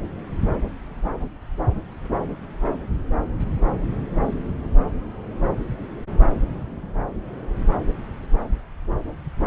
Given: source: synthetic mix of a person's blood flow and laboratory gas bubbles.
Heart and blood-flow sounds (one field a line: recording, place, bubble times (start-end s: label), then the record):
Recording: Doppler ultrasound of blood flow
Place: subclavian vein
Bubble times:
no bubbles
From the record:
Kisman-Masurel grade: 000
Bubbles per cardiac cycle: 0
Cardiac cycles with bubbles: 0%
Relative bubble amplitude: no bubbles discernible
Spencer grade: 0 (complete lack of bubble signals)